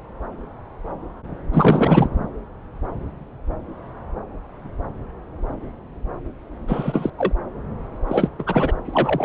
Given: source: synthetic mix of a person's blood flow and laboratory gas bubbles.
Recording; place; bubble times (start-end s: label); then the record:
Doppler ultrasound of blood flow; subclavian vein
1.51-2.07 s: bubbles
6.67-7.10 s: bubbles
7.18-7.33 s: bubbles
8.07-8.28 s: bubbles
8.38-8.44 s: bubbles
8.46-8.76 s: bubbles
8.87-9.25 s: bubbles
From the record:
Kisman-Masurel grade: 223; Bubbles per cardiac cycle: several, 3 to 8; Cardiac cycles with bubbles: 10 to 50%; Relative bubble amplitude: loud (0.450 to 0.775); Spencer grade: 2 (many but less than half of the cardiac periods contain bubble signals, singularly or in groups); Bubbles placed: anywhere in the cardiac cycle